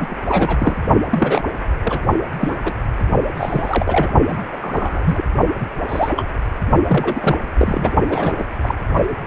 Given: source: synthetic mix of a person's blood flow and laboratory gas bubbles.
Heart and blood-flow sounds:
Doppler ultrasound of blood flow; precordium
0.00-0.16 s: bubbles
0.28-0.81 s: bubbles
1.10-1.44 s: bubbles
1.82-1.99 s: bubbles
2.38-2.55 s: bubbles
2.63-2.74 s: bubbles
3.34-4.12 s: bubbles
4.28-4.38 s: bubbles
4.52-4.57 s: bubbles
4.61-5.25 s: bubbles
5.59-5.67 s: bubbles
5.89-6.10 s: bubbles
6.16-6.24 s: bubbles
6.88-7.37 s: bubbles
7.58-7.94 s: bubbles
8.10-8.33 s: bubbles
8.38-8.44 s: bubbles
8.62-8.75 s: bubbles
From the record:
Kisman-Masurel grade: 232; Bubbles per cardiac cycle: several, 3 to 8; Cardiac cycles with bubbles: 50 to 99%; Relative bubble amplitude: moderate (0.250 to 0.450); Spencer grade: 3 (all of the cardiac periods contain showers or single bubble signals, but not dominating or overriding the cardiac motion signals); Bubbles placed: only in the low amplitude regions of the cardiac cycle

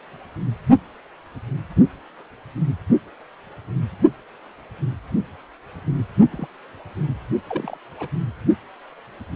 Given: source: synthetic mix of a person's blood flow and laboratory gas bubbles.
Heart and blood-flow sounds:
Doppler ultrasound of blood flow; precordium
6.31-6.47 s: bubbles
7.48-7.77 s: bubbles
7.99-8.07 s: bubbles
From the record:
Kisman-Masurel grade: 121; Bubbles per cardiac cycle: 1 to 2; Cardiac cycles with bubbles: 10 to 50%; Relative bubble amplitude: barely perceptible (0.100 to 0.250); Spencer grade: 2 (many but less than half of the cardiac periods contain bubble signals, singularly or in groups); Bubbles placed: only in the low amplitude regions of the cardiac cycle

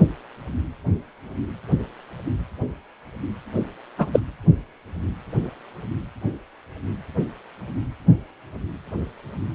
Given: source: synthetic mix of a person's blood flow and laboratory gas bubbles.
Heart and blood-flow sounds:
Doppler ultrasound of blood flow; precordium
3.98-4.08 s: bubbles
4.12-4.20 s: bubbles
From the record:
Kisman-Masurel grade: 123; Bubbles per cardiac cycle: 1 to 2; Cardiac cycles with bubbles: 10 to 50%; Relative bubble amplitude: loud (0.450 to 0.775); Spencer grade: 2 (many but less than half of the cardiac periods contain bubble signals, singularly or in groups); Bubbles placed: anywhere in the cardiac cycle

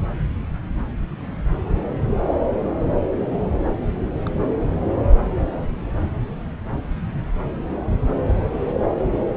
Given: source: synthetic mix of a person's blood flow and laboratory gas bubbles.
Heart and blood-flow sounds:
Doppler ultrasound of blood flow; subclavian vein
4.26-4.29 s: bubbles
7.34-7.39 s: bubbles
From the record:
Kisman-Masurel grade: 121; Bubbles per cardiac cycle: 1 to 2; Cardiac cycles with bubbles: 10 to 50%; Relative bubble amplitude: barely perceptible (0.100 to 0.250); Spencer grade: 2 (many but less than half of the cardiac periods contain bubble signals, singularly or in groups); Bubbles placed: anywhere in the cardiac cycle

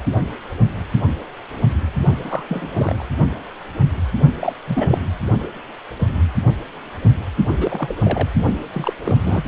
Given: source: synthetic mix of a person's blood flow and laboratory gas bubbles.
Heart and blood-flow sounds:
Doppler ultrasound of blood flow; precordium
2.25-2.43 s: bubbles
2.48-2.69 s: bubbles
2.74-3.03 s: bubbles
4.39-4.53 s: bubbles
4.67-4.98 s: bubbles
7.46-7.95 s: bubbles
8.03-8.29 s: bubbles
8.72-8.94 s: bubbles
9.04-9.17 s: bubbles
9.22-9.44 s: bubbles
From the record:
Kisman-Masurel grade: 222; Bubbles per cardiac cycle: several, 3 to 8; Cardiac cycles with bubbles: 10 to 50%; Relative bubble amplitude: moderate (0.250 to 0.450); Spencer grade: 2 (many but less than half of the cardiac periods contain bubble signals, singularly or in groups); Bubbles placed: only in the low amplitude regions of the cardiac cycle

